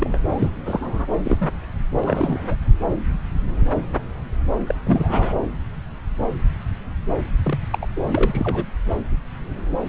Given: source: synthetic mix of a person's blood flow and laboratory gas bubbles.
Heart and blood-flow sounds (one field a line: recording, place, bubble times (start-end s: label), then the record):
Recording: Doppler ultrasound of blood flow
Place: subclavian vein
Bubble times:
0.01-0.18 s: bubbles
0.29-0.51 s: bubbles
0.66-1.05 s: bubbles
1.23-1.38 s: bubbles
1.41-1.49 s: bubbles
2.04-2.56 s: bubbles
4.67-4.75 s: bubbles
4.86-5.36 s: bubbles
7.44-7.58 s: bubbles
7.70-7.79 s: bubbles
7.82-7.86 s: bubbles
7.96-8.01 s: bubbles
8.07-8.64 s: bubbles
From the record:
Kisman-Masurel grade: 232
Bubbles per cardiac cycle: several, 3 to 8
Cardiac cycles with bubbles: 50 to 99%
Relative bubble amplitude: moderate (0.250 to 0.450)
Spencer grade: 3 (all of the cardiac periods contain showers or single bubble signals, but not dominating or overriding the cardiac motion signals)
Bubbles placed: anywhere in the cardiac cycle